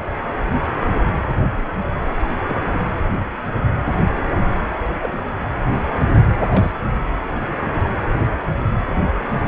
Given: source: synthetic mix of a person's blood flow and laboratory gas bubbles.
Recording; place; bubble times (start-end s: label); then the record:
Doppler ultrasound of blood flow; precordium
1.25-1.35 s: bubbles
2.48-2.55 s: bubbles
2.71-2.90 s: bubbles
5.00-5.19 s: bubbles
6.49-6.72 s: bubbles
From the record:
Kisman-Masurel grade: 121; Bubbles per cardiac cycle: 1 to 2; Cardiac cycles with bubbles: 10 to 50%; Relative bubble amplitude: barely perceptible (0.100 to 0.250); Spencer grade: 2 (many but less than half of the cardiac periods contain bubble signals, singularly or in groups); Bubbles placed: anywhere in the cardiac cycle